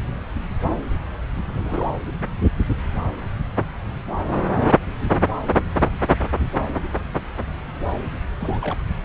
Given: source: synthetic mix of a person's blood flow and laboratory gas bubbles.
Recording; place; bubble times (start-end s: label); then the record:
Doppler ultrasound of blood flow; subclavian vein
1.47-1.92 s: bubbles
8.39-8.77 s: bubbles
From the record:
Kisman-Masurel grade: 211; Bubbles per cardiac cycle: several, 3 to 8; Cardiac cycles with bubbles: 1 to 10%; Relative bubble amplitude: barely perceptible (0.100 to 0.250); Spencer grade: 1 (occasional bubble signal discernible with the cardiac motion signal, with majority of cardiac periods free of bubbles); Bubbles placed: anywhere in the cardiac cycle